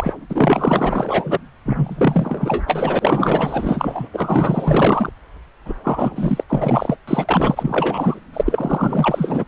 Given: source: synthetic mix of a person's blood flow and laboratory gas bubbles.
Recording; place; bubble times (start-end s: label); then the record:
Doppler ultrasound of blood flow; subclavian vein
0.00-0.14 s: bubbles
0.29-1.39 s: bubbles
1.65-4.09 s: bubbles
4.13-5.10 s: bubbles
5.65-5.73 s: bubbles
5.84-6.44 s: bubbles
6.48-6.97 s: bubbles
7.07-8.20 s: bubbles
8.33-9.45 s: bubbles
From the record:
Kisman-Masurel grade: 444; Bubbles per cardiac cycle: continuous sound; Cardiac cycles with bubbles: 100%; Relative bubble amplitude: maximal (0.775 to 0.999); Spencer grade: 4 (maximum detectable bubble signal sounding continuously throughout systole and diastole of every cardiac period, and overriding the amplitude of the normal cardiac signals); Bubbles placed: anywhere in the cardiac cycle